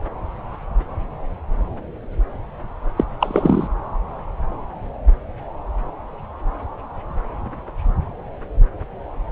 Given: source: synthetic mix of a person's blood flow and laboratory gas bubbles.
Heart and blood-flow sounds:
Doppler ultrasound of blood flow; subclavian vein
2.96-3.04 s: bubbles
3.20-3.67 s: bubbles
From the record:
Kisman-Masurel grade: 213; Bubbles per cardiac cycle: several, 3 to 8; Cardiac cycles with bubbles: 1 to 10%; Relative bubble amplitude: loud (0.450 to 0.775); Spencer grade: 1 (occasional bubble signal discernible with the cardiac motion signal, with majority of cardiac periods free of bubbles); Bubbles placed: anywhere in the cardiac cycle

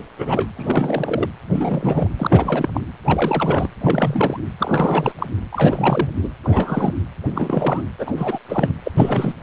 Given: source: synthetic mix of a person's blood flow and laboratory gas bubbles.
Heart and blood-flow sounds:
Doppler ultrasound of blood flow; precordium
0.19-0.48 s: bubbles
0.56-1.28 s: bubbles
1.52-2.08 s: bubbles
2.17-2.68 s: bubbles
2.73-2.81 s: bubbles
3.04-3.68 s: bubbles
3.81-4.40 s: bubbles
4.58-5.12 s: bubbles
5.19-5.27 s: bubbles
5.52-6.09 s: bubbles
6.23-6.29 s: bubbles
6.44-6.94 s: bubbles
7.35-7.83 s: bubbles
7.99-8.12 s: bubbles
8.16-8.38 s: bubbles
8.48-8.74 s: bubbles
8.84-8.91 s: bubbles
8.96-9.33 s: bubbles
From the record:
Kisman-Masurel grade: 342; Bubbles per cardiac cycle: rolling drumbeat, 9 or more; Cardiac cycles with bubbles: 100%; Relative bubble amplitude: moderate (0.250 to 0.450); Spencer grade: 3 (all of the cardiac periods contain showers or single bubble signals, but not dominating or overriding the cardiac motion signals); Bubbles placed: anywhere in the cardiac cycle

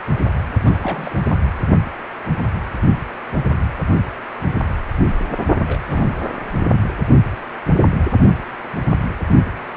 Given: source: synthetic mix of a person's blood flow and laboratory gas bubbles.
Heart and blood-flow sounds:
Doppler ultrasound of blood flow; precordium
0.65-1.18 s: bubbles
1.27-1.35 s: bubbles
1.41-1.50 s: bubbles
5.68-5.80 s: bubbles
5.89-6.52 s: bubbles
From the record:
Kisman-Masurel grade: 221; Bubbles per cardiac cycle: several, 3 to 8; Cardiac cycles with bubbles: 10 to 50%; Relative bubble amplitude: barely perceptible (0.100 to 0.250); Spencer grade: 2 (many but less than half of the cardiac periods contain bubble signals, singularly or in groups); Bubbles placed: only in the low amplitude regions of the cardiac cycle

